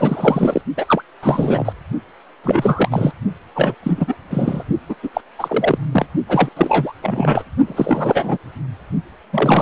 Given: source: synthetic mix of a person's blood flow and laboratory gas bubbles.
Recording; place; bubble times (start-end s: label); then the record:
Doppler ultrasound of blood flow; precordium
0.00-0.61 s: bubbles
0.76-0.85 s: bubbles
0.88-1.02 s: bubbles
1.22-1.73 s: bubbles
2.43-3.12 s: bubbles
3.55-3.75 s: bubbles
3.83-4.16 s: bubbles
4.30-4.63 s: bubbles
4.89-4.95 s: bubbles
5.03-5.09 s: bubbles
5.13-5.21 s: bubbles
5.38-5.78 s: bubbles
5.92-6.06 s: bubbles
6.28-6.50 s: bubbles
6.56-6.93 s: bubbles
7.01-7.44 s: bubbles
7.66-8.38 s: bubbles
9.32-9.62 s: bubbles
From the record:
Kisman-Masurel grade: 343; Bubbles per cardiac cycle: rolling drumbeat, 9 or more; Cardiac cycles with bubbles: 100%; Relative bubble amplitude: loud (0.450 to 0.775); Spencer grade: 3 (all of the cardiac periods contain showers or single bubble signals, but not dominating or overriding the cardiac motion signals); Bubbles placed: only in the low amplitude regions of the cardiac cycle